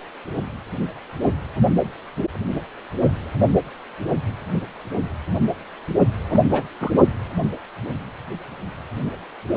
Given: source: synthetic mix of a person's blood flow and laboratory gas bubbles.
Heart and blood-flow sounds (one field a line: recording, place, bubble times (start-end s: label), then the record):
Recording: Doppler ultrasound of blood flow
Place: precordium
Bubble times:
6.29-6.41 s: bubbles
6.51-6.63 s: bubbles
6.80-6.91 s: bubbles
From the record:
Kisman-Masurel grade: 212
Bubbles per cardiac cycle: several, 3 to 8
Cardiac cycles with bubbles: 1 to 10%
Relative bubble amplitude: moderate (0.250 to 0.450)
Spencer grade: 1 (occasional bubble signal discernible with the cardiac motion signal, with majority of cardiac periods free of bubbles)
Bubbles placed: only in the low amplitude regions of the cardiac cycle